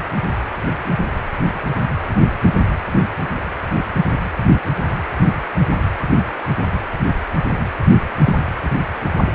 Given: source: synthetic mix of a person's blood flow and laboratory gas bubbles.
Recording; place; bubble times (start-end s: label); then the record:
Doppler ultrasound of blood flow; precordium
8.24-8.34 s: bubbles
From the record:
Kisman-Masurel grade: 113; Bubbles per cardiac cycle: 1 to 2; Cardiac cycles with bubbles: 1 to 10%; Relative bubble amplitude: loud (0.450 to 0.775); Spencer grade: 1 (occasional bubble signal discernible with the cardiac motion signal, with majority of cardiac periods free of bubbles); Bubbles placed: anywhere in the cardiac cycle